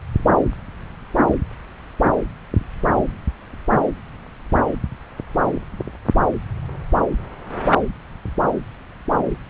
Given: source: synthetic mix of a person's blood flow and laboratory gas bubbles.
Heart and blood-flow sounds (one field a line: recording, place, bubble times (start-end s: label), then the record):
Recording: Doppler ultrasound of blood flow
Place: subclavian vein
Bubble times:
9.29-9.38 s: bubbles
From the record:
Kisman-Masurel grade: 111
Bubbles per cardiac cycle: 1 to 2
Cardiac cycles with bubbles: 1 to 10%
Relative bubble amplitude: barely perceptible (0.100 to 0.250)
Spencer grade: 1 (occasional bubble signal discernible with the cardiac motion signal, with majority of cardiac periods free of bubbles)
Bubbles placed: anywhere in the cardiac cycle